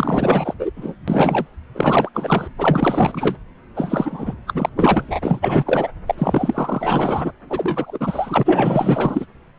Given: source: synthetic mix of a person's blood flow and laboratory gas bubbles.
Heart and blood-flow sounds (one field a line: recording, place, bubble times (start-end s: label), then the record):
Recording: Doppler ultrasound of blood flow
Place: subclavian vein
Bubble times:
0.00-0.54 s: bubbles
0.58-0.71 s: bubbles
0.76-0.95 s: bubbles
1.07-1.47 s: bubbles
1.74-2.09 s: bubbles
2.14-2.48 s: bubbles
2.58-3.35 s: bubbles
3.75-4.34 s: bubbles
4.46-4.69 s: bubbles
4.76-5.89 s: bubbles
6.07-6.14 s: bubbles
6.17-7.32 s: bubbles
7.50-9.26 s: bubbles
From the record:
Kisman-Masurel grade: 444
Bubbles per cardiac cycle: continuous sound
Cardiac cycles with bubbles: 100%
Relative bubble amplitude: maximal (0.775 to 0.999)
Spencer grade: 4 (maximum detectable bubble signal sounding continuously throughout systole and diastole of every cardiac period, and overriding the amplitude of the normal cardiac signals)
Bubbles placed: anywhere in the cardiac cycle